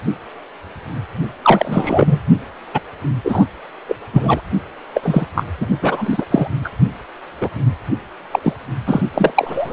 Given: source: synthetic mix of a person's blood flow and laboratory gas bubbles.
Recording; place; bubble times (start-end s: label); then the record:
Doppler ultrasound of blood flow; precordium
1.42-2.20 s: bubbles
2.73-2.80 s: bubbles
3.25-3.45 s: bubbles
3.88-3.96 s: bubbles
4.12-4.41 s: bubbles
4.93-5.26 s: bubbles
5.35-5.44 s: bubbles
5.60-5.67 s: bubbles
5.82-6.25 s: bubbles
6.30-6.47 s: bubbles
6.64-6.70 s: bubbles
7.41-7.49 s: bubbles
8.31-8.39 s: bubbles
8.43-8.53 s: bubbles
8.86-9.02 s: bubbles
9.14-9.73 s: bubbles
From the record:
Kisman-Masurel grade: 233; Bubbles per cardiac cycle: several, 3 to 8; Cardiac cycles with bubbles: 50 to 99%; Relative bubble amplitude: loud (0.450 to 0.775); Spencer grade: 3 (all of the cardiac periods contain showers or single bubble signals, but not dominating or overriding the cardiac motion signals); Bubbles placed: only in the low amplitude regions of the cardiac cycle